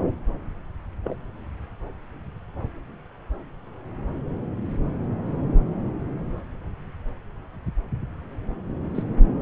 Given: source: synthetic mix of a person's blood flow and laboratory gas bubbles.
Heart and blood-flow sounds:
Doppler ultrasound of blood flow; subclavian vein
1.04-1.16 s: bubbles
8.95-9.03 s: bubbles
From the record:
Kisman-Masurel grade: 121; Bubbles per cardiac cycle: 1 to 2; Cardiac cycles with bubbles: 10 to 50%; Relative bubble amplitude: barely perceptible (0.100 to 0.250); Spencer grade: 2 (many but less than half of the cardiac periods contain bubble signals, singularly or in groups); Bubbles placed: anywhere in the cardiac cycle

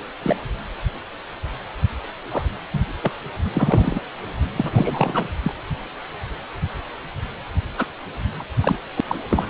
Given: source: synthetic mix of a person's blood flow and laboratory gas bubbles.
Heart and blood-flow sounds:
Doppler ultrasound of blood flow; precordium
0.23-0.36 s: bubbles
2.31-2.45 s: bubbles
2.74-2.80 s: bubbles
3.02-3.12 s: bubbles
3.53-4.00 s: bubbles
4.56-5.28 s: bubbles
5.42-5.55 s: bubbles
7.78-7.86 s: bubbles
8.39-8.44 s: bubbles
8.61-8.79 s: bubbles
8.97-9.00 s: bubbles
9.07-9.15 s: bubbles
9.30-9.50 s: bubbles
From the record:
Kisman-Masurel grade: 222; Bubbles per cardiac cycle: several, 3 to 8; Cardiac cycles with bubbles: 10 to 50%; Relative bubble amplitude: moderate (0.250 to 0.450); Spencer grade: 2 (many but less than half of the cardiac periods contain bubble signals, singularly or in groups); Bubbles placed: anywhere in the cardiac cycle

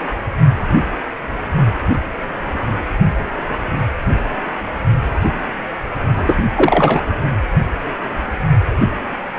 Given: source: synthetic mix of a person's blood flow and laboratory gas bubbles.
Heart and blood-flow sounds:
Doppler ultrasound of blood flow; precordium
6.14-6.44 s: bubbles
6.56-7.01 s: bubbles
From the record:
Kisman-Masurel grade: 223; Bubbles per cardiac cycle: several, 3 to 8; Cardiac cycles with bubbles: 10 to 50%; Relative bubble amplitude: loud (0.450 to 0.775); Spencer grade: 2 (many but less than half of the cardiac periods contain bubble signals, singularly or in groups); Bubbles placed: only in the low amplitude regions of the cardiac cycle

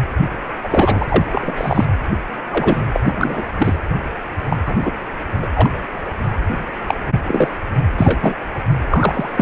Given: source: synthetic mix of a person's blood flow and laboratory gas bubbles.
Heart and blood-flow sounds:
Doppler ultrasound of blood flow; precordium
0.64-1.24 s: bubbles
1.32-1.53 s: bubbles
1.57-1.85 s: bubbles
2.50-2.81 s: bubbles
2.92-3.00 s: bubbles
3.05-3.44 s: bubbles
3.58-3.79 s: bubbles
4.50-4.57 s: bubbles
4.65-4.92 s: bubbles
5.42-5.47 s: bubbles
5.54-5.70 s: bubbles
6.88-6.95 s: bubbles
7.26-7.49 s: bubbles
7.97-8.33 s: bubbles
8.89-9.33 s: bubbles
9.37-9.42 s: bubbles
From the record:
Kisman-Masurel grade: 233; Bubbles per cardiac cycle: several, 3 to 8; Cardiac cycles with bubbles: 50 to 99%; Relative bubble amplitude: loud (0.450 to 0.775); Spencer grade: 3 (all of the cardiac periods contain showers or single bubble signals, but not dominating or overriding the cardiac motion signals); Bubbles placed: anywhere in the cardiac cycle

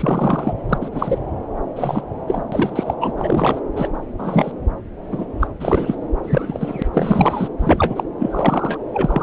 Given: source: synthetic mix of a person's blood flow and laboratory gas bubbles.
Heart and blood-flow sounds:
Doppler ultrasound of blood flow; subclavian vein
0.00-0.54 s: bubbles
0.69-0.78 s: bubbles
0.81-1.19 s: bubbles
1.76-2.02 s: bubbles
2.27-2.43 s: bubbles
2.52-2.94 s: bubbles
3.01-3.13 s: bubbles
3.18-3.60 s: bubbles
3.76-3.88 s: bubbles
4.18-4.51 s: bubbles
5.11-5.25 s: bubbles
5.39-5.47 s: bubbles
5.59-5.96 s: bubbles
6.24-6.82 s: bubbles
6.93-7.48 s: bubbles
7.59-8.04 s: bubbles
8.19-8.77 s: bubbles
8.93-9.23 s: bubbles
From the record:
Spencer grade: 3 (all of the cardiac periods contain showers or single bubble signals, but not dominating or overriding the cardiac motion signals); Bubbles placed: anywhere in the cardiac cycle

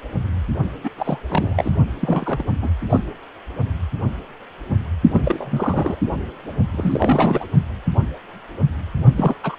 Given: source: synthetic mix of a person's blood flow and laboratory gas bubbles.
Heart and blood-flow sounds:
Doppler ultrasound of blood flow; precordium
0.83-0.91 s: bubbles
0.97-1.18 s: bubbles
1.29-1.76 s: bubbles
1.99-2.43 s: bubbles
2.61-2.70 s: bubbles
2.89-3.01 s: bubbles
5.12-6.00 s: bubbles
6.72-7.45 s: bubbles
9.15-9.35 s: bubbles
9.42-9.55 s: bubbles
From the record:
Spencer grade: 3 (all of the cardiac periods contain showers or single bubble signals, but not dominating or overriding the cardiac motion signals); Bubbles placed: only in the low amplitude regions of the cardiac cycle

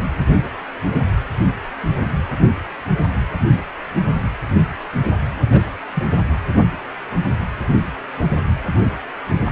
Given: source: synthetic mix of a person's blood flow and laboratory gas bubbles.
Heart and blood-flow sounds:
Doppler ultrasound of blood flow; precordium
5.51-5.60 s: bubbles
5.94-6.04 s: bubbles
From the record:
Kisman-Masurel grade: 112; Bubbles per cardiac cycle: 1 to 2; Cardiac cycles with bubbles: 1 to 10%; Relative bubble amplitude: moderate (0.250 to 0.450); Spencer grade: 1 (occasional bubble signal discernible with the cardiac motion signal, with majority of cardiac periods free of bubbles); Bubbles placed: anywhere in the cardiac cycle

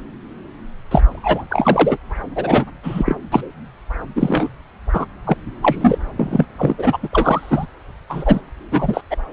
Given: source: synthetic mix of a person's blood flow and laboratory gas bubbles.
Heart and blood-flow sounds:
Doppler ultrasound of blood flow; subclavian vein
0.91-1.04 s: bubbles
1.10-1.46 s: bubbles
1.50-1.98 s: bubbles
2.35-2.65 s: bubbles
2.83-3.16 s: bubbles
3.31-3.44 s: bubbles
4.16-4.48 s: bubbles
4.93-5.07 s: bubbles
5.26-5.33 s: bubbles
5.62-5.99 s: bubbles
6.17-6.46 s: bubbles
6.57-6.97 s: bubbles
7.03-7.08 s: bubbles
7.12-7.66 s: bubbles
8.09-8.41 s: bubbles
8.71-9.01 s: bubbles
9.10-9.16 s: bubbles
From the record:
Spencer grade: 3 (all of the cardiac periods contain showers or single bubble signals, but not dominating or overriding the cardiac motion signals); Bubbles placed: anywhere in the cardiac cycle

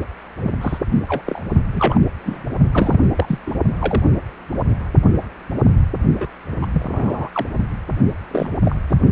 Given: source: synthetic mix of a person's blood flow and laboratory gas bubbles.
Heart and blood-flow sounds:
Doppler ultrasound of blood flow; precordium
0.40-0.52 s: bubbles
0.61-0.79 s: bubbles
1.08-1.22 s: bubbles
1.27-1.42 s: bubbles
1.73-1.98 s: bubbles
2.25-2.44 s: bubbles
2.73-2.99 s: bubbles
3.15-3.40 s: bubbles
3.46-3.54 s: bubbles
3.79-4.01 s: bubbles
4.52-4.56 s: bubbles
6.14-6.30 s: bubbles
6.62-6.66 s: bubbles
6.74-7.29 s: bubbles
7.34-7.46 s: bubbles
7.55-7.66 s: bubbles
8.31-8.51 s: bubbles
8.65-8.76 s: bubbles
8.90-8.95 s: bubbles
From the record:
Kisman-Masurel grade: 232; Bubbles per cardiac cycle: several, 3 to 8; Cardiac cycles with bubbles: 50 to 99%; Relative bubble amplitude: moderate (0.250 to 0.450); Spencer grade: 3 (all of the cardiac periods contain showers or single bubble signals, but not dominating or overriding the cardiac motion signals); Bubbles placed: only in the low amplitude regions of the cardiac cycle

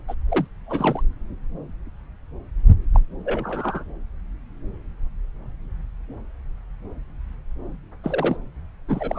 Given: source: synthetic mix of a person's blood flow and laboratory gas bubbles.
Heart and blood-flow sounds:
Doppler ultrasound of blood flow; subclavian vein
0.08-0.15 s: bubbles
0.29-0.47 s: bubbles
0.66-1.02 s: bubbles
2.94-2.99 s: bubbles
3.24-3.83 s: bubbles
8.04-8.37 s: bubbles
8.88-9.19 s: bubbles
From the record:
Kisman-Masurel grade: 232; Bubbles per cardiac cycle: several, 3 to 8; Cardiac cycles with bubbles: 50 to 99%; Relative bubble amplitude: moderate (0.250 to 0.450); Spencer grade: 3 (all of the cardiac periods contain showers or single bubble signals, but not dominating or overriding the cardiac motion signals); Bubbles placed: anywhere in the cardiac cycle

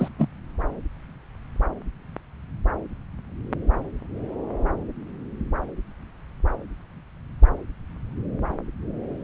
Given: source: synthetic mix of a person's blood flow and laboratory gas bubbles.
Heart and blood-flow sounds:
Doppler ultrasound of blood flow; subclavian vein
0.00-0.08 s: bubbles
0.18-0.28 s: bubbles
From the record:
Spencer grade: 2 (many but less than half of the cardiac periods contain bubble signals, singularly or in groups); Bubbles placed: anywhere in the cardiac cycle

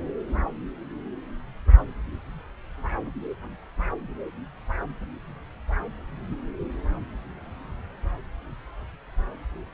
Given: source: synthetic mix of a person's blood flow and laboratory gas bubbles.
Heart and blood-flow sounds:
Doppler ultrasound of blood flow; subclavian vein
no bubbles
From the record:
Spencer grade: 0 (complete lack of bubble signals)

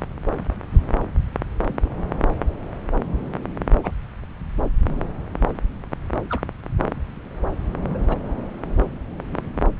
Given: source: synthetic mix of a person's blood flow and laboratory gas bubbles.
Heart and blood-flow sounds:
Doppler ultrasound of blood flow; subclavian vein
1.67-1.91 s: bubbles
3.83-3.91 s: bubbles
6.30-6.40 s: bubbles
7.89-7.98 s: bubbles
8.09-8.18 s: bubbles
9.33-9.41 s: bubbles
9.56-9.61 s: bubbles
From the record:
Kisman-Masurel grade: 121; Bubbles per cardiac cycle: 1 to 2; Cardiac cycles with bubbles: 10 to 50%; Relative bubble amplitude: barely perceptible (0.100 to 0.250); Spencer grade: 2 (many but less than half of the cardiac periods contain bubble signals, singularly or in groups); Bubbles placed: anywhere in the cardiac cycle

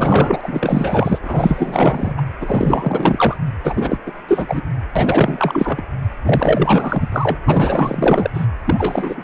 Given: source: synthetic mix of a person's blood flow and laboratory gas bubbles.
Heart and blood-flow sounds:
Doppler ultrasound of blood flow; precordium
0.00-1.19 s: bubbles
1.23-2.21 s: bubbles
2.41-3.37 s: bubbles
3.64-3.98 s: bubbles
4.06-4.12 s: bubbles
4.28-4.61 s: bubbles
4.96-5.83 s: bubbles
6.24-7.09 s: bubbles
7.12-7.38 s: bubbles
7.45-8.30 s: bubbles
8.34-8.46 s: bubbles
8.64-9.24 s: bubbles
From the record:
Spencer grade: 4 (maximum detectable bubble signal sounding continuously throughout systole and diastole of every cardiac period, and overriding the amplitude of the normal cardiac signals); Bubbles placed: anywhere in the cardiac cycle

